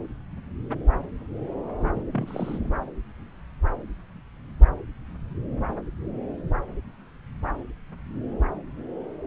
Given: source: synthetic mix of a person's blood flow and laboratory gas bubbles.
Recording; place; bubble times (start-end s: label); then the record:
Doppler ultrasound of blood flow; subclavian vein
1.79-1.92 s: bubbles
1.95-2.02 s: bubbles
2.12-2.70 s: bubbles
From the record:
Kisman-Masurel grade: 211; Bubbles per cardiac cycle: several, 3 to 8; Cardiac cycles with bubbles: 1 to 10%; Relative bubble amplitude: barely perceptible (0.100 to 0.250); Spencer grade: 1 (occasional bubble signal discernible with the cardiac motion signal, with majority of cardiac periods free of bubbles); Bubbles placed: anywhere in the cardiac cycle